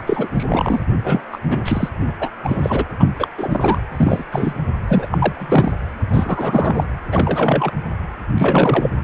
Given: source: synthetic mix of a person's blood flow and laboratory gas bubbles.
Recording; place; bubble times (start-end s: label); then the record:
Doppler ultrasound of blood flow; precordium
0.00-0.29 s: bubbles
0.34-0.80 s: bubbles
1.04-1.22 s: bubbles
1.32-1.40 s: bubbles
1.49-1.89 s: bubbles
2.00-2.12 s: bubbles
2.19-2.29 s: bubbles
2.43-2.84 s: bubbles
2.99-3.08 s: bubbles
3.19-3.27 s: bubbles
3.38-3.81 s: bubbles
3.92-4.25 s: bubbles
4.31-4.54 s: bubbles
4.88-5.06 s: bubbles
5.10-5.72 s: bubbles
6.08-6.99 s: bubbles
7.12-7.71 s: bubbles
8.38-8.90 s: bubbles
From the record:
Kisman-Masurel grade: 343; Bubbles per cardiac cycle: rolling drumbeat, 9 or more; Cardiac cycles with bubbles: 100%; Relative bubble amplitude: loud (0.450 to 0.775); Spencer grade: 3 (all of the cardiac periods contain showers or single bubble signals, but not dominating or overriding the cardiac motion signals); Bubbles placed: anywhere in the cardiac cycle